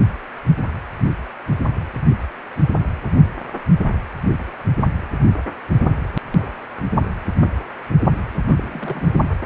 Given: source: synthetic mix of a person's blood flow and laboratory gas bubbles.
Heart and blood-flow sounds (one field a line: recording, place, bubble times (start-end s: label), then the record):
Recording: Doppler ultrasound of blood flow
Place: precordium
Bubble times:
8.34-8.39 s: bubbles
8.46-9.19 s: bubbles
9.44-9.46 s: bubbles
From the record:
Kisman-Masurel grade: 221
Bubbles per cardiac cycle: several, 3 to 8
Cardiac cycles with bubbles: 10 to 50%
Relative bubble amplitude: barely perceptible (0.100 to 0.250)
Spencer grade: 2 (many but less than half of the cardiac periods contain bubble signals, singularly or in groups)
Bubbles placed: anywhere in the cardiac cycle